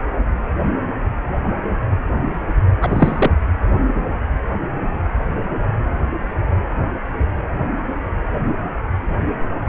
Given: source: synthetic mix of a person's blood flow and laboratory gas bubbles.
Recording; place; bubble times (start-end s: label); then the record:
Doppler ultrasound of blood flow; precordium
2.82-3.31 s: bubbles
From the record:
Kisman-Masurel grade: 213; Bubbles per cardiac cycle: several, 3 to 8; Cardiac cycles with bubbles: 1 to 10%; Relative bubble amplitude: loud (0.450 to 0.775); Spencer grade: 1 (occasional bubble signal discernible with the cardiac motion signal, with majority of cardiac periods free of bubbles); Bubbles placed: only in the low amplitude regions of the cardiac cycle